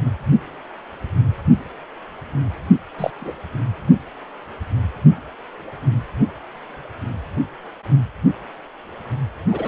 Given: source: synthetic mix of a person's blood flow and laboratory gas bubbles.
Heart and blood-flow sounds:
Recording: Doppler ultrasound of blood flow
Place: precordium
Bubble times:
2.98-3.10 s: bubbles
3.20-3.33 s: bubbles
9.50-9.68 s: bubbles
From the record:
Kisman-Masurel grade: 122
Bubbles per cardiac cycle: 1 to 2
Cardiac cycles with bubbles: 10 to 50%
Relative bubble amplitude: moderate (0.250 to 0.450)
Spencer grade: 2 (many but less than half of the cardiac periods contain bubble signals, singularly or in groups)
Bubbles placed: anywhere in the cardiac cycle

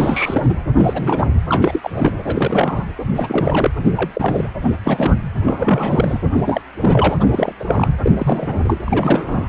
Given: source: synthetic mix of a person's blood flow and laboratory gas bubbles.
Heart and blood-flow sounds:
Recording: Doppler ultrasound of blood flow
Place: precordium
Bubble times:
0.00-0.56 s: bubbles
0.77-1.27 s: bubbles
1.49-1.90 s: bubbles
1.94-2.12 s: bubbles
2.25-2.88 s: bubbles
3.15-3.71 s: bubbles
3.84-4.10 s: bubbles
4.14-4.50 s: bubbles
4.63-4.70 s: bubbles
4.83-5.15 s: bubbles
5.43-6.19 s: bubbles
6.34-6.61 s: bubbles
6.79-7.16 s: bubbles
7.20-7.52 s: bubbles
7.59-7.64 s: bubbles
7.67-7.96 s: bubbles
8.03-8.12 s: bubbles
8.16-8.78 s: bubbles
8.86-9.49 s: bubbles
From the record:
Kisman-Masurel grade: 343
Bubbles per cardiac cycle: rolling drumbeat, 9 or more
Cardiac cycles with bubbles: 100%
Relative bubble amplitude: loud (0.450 to 0.775)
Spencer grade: 3 (all of the cardiac periods contain showers or single bubble signals, but not dominating or overriding the cardiac motion signals)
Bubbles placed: anywhere in the cardiac cycle

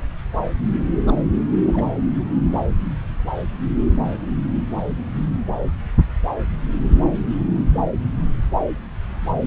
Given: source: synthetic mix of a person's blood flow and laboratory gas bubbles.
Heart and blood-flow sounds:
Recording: Doppler ultrasound of blood flow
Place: subclavian vein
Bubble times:
1.06-1.15 s: bubbles
1.67-1.85 s: bubbles
From the record:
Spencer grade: 1 (occasional bubble signal discernible with the cardiac motion signal, with majority of cardiac periods free of bubbles)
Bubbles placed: anywhere in the cardiac cycle

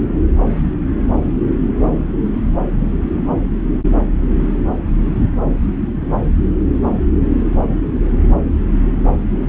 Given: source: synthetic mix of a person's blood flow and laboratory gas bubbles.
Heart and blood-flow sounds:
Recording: Doppler ultrasound of blood flow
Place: subclavian vein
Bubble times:
no bubbles
From the record:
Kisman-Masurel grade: 000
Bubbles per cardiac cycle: 0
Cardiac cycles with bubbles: 0%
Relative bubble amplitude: no bubbles discernible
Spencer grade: 0 (complete lack of bubble signals)

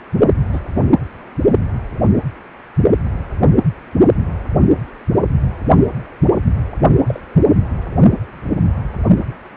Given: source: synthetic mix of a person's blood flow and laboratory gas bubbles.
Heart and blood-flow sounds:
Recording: Doppler ultrasound of blood flow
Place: precordium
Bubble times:
0.53-0.60 s: bubbles
0.75-0.82 s: bubbles
7.06-7.20 s: bubbles
From the record:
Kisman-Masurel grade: 122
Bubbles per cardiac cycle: 1 to 2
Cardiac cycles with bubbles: 10 to 50%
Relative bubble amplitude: moderate (0.250 to 0.450)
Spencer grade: 2 (many but less than half of the cardiac periods contain bubble signals, singularly or in groups)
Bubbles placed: only in the low amplitude regions of the cardiac cycle

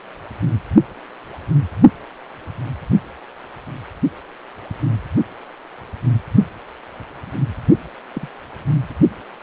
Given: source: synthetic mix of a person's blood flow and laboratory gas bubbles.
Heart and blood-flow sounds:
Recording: Doppler ultrasound of blood flow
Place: precordium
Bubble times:
8.13-8.28 s: bubbles
From the record:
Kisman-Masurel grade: 111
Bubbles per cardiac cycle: 1 to 2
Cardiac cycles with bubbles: 1 to 10%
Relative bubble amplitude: barely perceptible (0.100 to 0.250)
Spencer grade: 1 (occasional bubble signal discernible with the cardiac motion signal, with majority of cardiac periods free of bubbles)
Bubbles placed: only in the low amplitude regions of the cardiac cycle

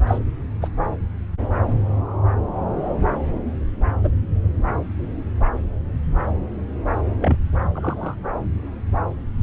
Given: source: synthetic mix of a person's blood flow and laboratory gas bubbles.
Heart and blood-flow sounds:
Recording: Doppler ultrasound of blood flow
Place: subclavian vein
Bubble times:
0.07-0.18 s: bubbles
0.61-0.68 s: bubbles
4.04-4.12 s: bubbles
7.19-7.37 s: bubbles
7.74-8.15 s: bubbles
From the record:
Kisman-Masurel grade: 122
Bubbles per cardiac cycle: 1 to 2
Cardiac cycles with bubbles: 10 to 50%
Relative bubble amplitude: moderate (0.250 to 0.450)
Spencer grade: 2 (many but less than half of the cardiac periods contain bubble signals, singularly or in groups)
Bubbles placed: anywhere in the cardiac cycle

